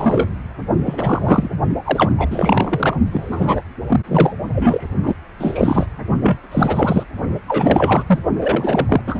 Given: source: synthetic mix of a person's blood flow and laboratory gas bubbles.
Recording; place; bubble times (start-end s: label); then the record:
Doppler ultrasound of blood flow; precordium
0.00-0.29 s: bubbles
0.85-1.50 s: bubbles
1.84-2.12 s: bubbles
2.17-2.97 s: bubbles
3.12-3.62 s: bubbles
3.87-4.00 s: bubbles
4.08-4.33 s: bubbles
4.52-4.88 s: bubbles
5.03-5.15 s: bubbles
5.39-5.86 s: bubbles
6.21-6.38 s: bubbles
6.51-7.04 s: bubbles
7.47-8.04 s: bubbles
8.07-8.19 s: bubbles
8.41-9.01 s: bubbles
9.07-9.20 s: bubbles
From the record:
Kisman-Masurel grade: 343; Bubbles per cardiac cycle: rolling drumbeat, 9 or more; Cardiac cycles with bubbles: 100%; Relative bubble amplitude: loud (0.450 to 0.775); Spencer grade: 3 (all of the cardiac periods contain showers or single bubble signals, but not dominating or overriding the cardiac motion signals); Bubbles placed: only in the low amplitude regions of the cardiac cycle